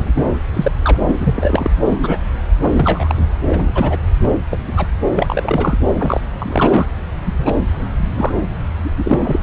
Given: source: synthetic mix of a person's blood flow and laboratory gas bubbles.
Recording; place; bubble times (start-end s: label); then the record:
Doppler ultrasound of blood flow; subclavian vein
0.00-0.24 s: bubbles
0.54-0.71 s: bubbles
0.82-0.97 s: bubbles
1.06-1.71 s: bubbles
1.87-2.19 s: bubbles
2.59-3.15 s: bubbles
3.18-3.26 s: bubbles
3.49-3.71 s: bubbles
3.74-3.99 s: bubbles
4.23-4.30 s: bubbles
4.50-4.62 s: bubbles
4.67-4.73 s: bubbles
4.76-4.88 s: bubbles
5.15-5.77 s: bubbles
6.00-6.21 s: bubbles
6.38-6.86 s: bubbles
7.25-7.33 s: bubbles
7.38-7.54 s: bubbles
8.16-8.32 s: bubbles
8.83-8.91 s: bubbles
8.97-9.39 s: bubbles
From the record:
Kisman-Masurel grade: 243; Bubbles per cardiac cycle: several, 3 to 8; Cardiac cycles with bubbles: 100%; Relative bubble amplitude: loud (0.450 to 0.775); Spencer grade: 3 (all of the cardiac periods contain showers or single bubble signals, but not dominating or overriding the cardiac motion signals); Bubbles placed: anywhere in the cardiac cycle